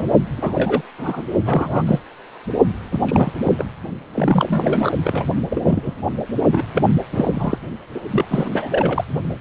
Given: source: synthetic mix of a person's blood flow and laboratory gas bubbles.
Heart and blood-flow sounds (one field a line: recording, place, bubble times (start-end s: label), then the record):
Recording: Doppler ultrasound of blood flow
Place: precordium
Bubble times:
0.00-0.06 s: bubbles
0.38-0.82 s: bubbles
0.98-1.23 s: bubbles
1.46-1.83 s: bubbles
1.86-1.99 s: bubbles
2.92-3.00 s: bubbles
3.04-3.66 s: bubbles
4.14-4.91 s: bubbles
5.04-5.25 s: bubbles
5.50-5.95 s: bubbles
6.52-6.64 s: bubbles
6.74-6.83 s: bubbles
7.12-7.58 s: bubbles
7.94-8.01 s: bubbles
8.12-8.25 s: bubbles
8.28-8.49 s: bubbles
8.52-9.04 s: bubbles
From the record:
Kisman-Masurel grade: 242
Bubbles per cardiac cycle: several, 3 to 8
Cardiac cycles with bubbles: 100%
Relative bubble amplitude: moderate (0.250 to 0.450)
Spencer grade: 3 (all of the cardiac periods contain showers or single bubble signals, but not dominating or overriding the cardiac motion signals)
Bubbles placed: only in the low amplitude regions of the cardiac cycle